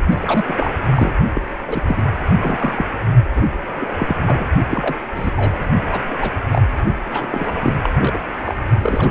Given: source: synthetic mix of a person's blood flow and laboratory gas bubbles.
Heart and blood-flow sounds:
Doppler ultrasound of blood flow; precordium
0.11-0.16 s: bubbles
0.22-0.75 s: bubbles
0.90-1.12 s: bubbles
1.34-1.43 s: bubbles
1.67-1.83 s: bubbles
1.88-2.02 s: bubbles
2.39-2.85 s: bubbles
3.35-3.43 s: bubbles
3.75-3.92 s: bubbles
3.97-4.16 s: bubbles
4.26-4.47 s: bubbles
4.70-4.96 s: bubbles
5.15-5.30 s: bubbles
5.37-5.54 s: bubbles
5.91-6.01 s: bubbles
6.08-6.16 s: bubbles
6.21-6.33 s: bubbles
6.53-6.62 s: bubbles
7.11-7.28 s: bubbles
7.30-7.51 s: bubbles
7.58-7.73 s: bubbles
7.81-7.89 s: bubbles
7.99-8.19 s: bubbles
8.46-8.54 s: bubbles
8.82-9.11 s: bubbles
From the record:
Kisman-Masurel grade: 242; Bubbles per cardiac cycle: several, 3 to 8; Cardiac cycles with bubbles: 100%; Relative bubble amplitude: moderate (0.250 to 0.450); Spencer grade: 3 (all of the cardiac periods contain showers or single bubble signals, but not dominating or overriding the cardiac motion signals); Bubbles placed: only in the low amplitude regions of the cardiac cycle

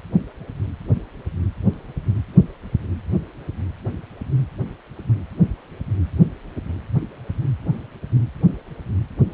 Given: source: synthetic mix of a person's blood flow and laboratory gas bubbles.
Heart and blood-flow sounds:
Doppler ultrasound of blood flow; precordium
no bubbles
From the record:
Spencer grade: 0 (complete lack of bubble signals)

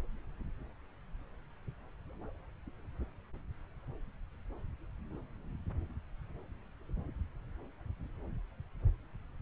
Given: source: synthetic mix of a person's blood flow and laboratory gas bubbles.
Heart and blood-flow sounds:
Doppler ultrasound of blood flow; subclavian vein
no bubbles
From the record:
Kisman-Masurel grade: 000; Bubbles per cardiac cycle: 0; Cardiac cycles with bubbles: 0%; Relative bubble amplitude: no bubbles discernible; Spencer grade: 0 (complete lack of bubble signals)

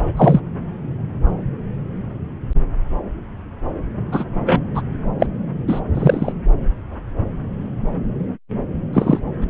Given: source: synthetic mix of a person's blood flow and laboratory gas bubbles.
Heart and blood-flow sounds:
Doppler ultrasound of blood flow; subclavian vein
0.16-0.40 s: bubbles
4.12-4.24 s: bubbles
4.46-4.61 s: bubbles
4.75-4.82 s: bubbles
5.19-5.27 s: bubbles
5.68-5.81 s: bubbles
5.95-6.33 s: bubbles
8.93-9.19 s: bubbles
9.41-9.45 s: bubbles
From the record:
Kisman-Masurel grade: 123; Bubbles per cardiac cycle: 1 to 2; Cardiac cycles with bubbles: 10 to 50%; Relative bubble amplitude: loud (0.450 to 0.775); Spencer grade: 2 (many but less than half of the cardiac periods contain bubble signals, singularly or in groups); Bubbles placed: anywhere in the cardiac cycle

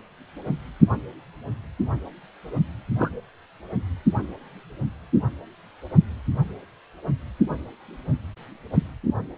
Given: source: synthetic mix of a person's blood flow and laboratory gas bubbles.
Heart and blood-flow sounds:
Doppler ultrasound of blood flow; precordium
2.98-3.09 s: bubbles
From the record:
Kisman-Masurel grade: 112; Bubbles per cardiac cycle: 1 to 2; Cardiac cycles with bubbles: 1 to 10%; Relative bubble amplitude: moderate (0.250 to 0.450); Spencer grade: 1 (occasional bubble signal discernible with the cardiac motion signal, with majority of cardiac periods free of bubbles); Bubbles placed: anywhere in the cardiac cycle

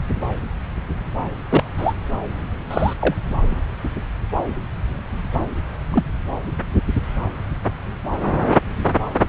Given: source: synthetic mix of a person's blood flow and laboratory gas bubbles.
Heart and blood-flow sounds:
Doppler ultrasound of blood flow; subclavian vein
1.50-1.64 s: bubbles
1.77-1.93 s: bubbles
2.71-2.94 s: bubbles
3.00-3.15 s: bubbles
5.92-6.04 s: bubbles
From the record:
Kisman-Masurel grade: 122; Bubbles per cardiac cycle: 1 to 2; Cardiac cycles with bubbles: 10 to 50%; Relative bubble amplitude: moderate (0.250 to 0.450); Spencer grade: 2 (many but less than half of the cardiac periods contain bubble signals, singularly or in groups); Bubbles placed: anywhere in the cardiac cycle

